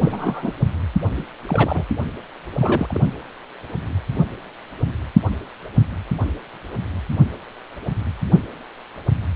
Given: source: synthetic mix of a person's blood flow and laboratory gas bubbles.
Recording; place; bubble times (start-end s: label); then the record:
Doppler ultrasound of blood flow; precordium
0.01-0.53 s: bubbles
1.15-1.23 s: bubbles
1.48-1.84 s: bubbles
2.53-3.01 s: bubbles
From the record:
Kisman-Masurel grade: 222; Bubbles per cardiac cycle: several, 3 to 8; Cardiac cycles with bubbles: 10 to 50%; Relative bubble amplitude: moderate (0.250 to 0.450); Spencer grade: 2 (many but less than half of the cardiac periods contain bubble signals, singularly or in groups); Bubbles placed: only in the low amplitude regions of the cardiac cycle